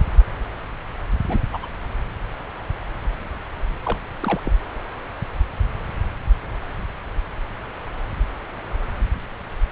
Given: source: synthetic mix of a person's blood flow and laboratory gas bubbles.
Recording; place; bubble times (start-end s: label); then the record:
Doppler ultrasound of blood flow; subclavian vein
1.27-1.41 s: bubbles
1.50-1.57 s: bubbles
1.62-1.69 s: bubbles
3.84-3.98 s: bubbles
4.20-4.40 s: bubbles
4.45-4.51 s: bubbles
From the record:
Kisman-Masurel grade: 221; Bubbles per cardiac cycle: several, 3 to 8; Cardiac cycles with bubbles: 10 to 50%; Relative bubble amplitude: barely perceptible (0.100 to 0.250); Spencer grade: 2 (many but less than half of the cardiac periods contain bubble signals, singularly or in groups); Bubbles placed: anywhere in the cardiac cycle